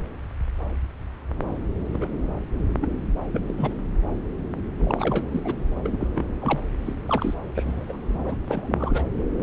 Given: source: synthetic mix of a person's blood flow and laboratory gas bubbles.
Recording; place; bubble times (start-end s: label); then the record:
Doppler ultrasound of blood flow; subclavian vein
1.93-2.09 s: bubbles
2.81-2.90 s: bubbles
3.32-3.42 s: bubbles
3.47-3.54 s: bubbles
3.57-3.74 s: bubbles
4.79-5.25 s: bubbles
5.31-5.41 s: bubbles
5.44-5.54 s: bubbles
5.83-6.08 s: bubbles
6.14-6.25 s: bubbles
6.40-6.61 s: bubbles
6.86-6.95 s: bubbles
7.06-7.42 s: bubbles
7.55-7.85 s: bubbles
7.88-7.97 s: bubbles
8.08-8.38 s: bubbles
8.47-9.03 s: bubbles
From the record:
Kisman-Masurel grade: 232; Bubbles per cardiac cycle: several, 3 to 8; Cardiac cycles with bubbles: 50 to 99%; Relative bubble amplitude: moderate (0.250 to 0.450); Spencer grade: 3 (all of the cardiac periods contain showers or single bubble signals, but not dominating or overriding the cardiac motion signals); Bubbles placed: anywhere in the cardiac cycle